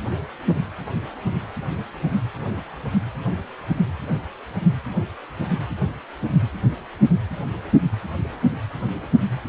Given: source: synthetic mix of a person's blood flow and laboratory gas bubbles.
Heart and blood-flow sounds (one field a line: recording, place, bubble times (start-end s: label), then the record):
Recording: Doppler ultrasound of blood flow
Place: precordium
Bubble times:
no bubbles
From the record:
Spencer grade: 0 (complete lack of bubble signals)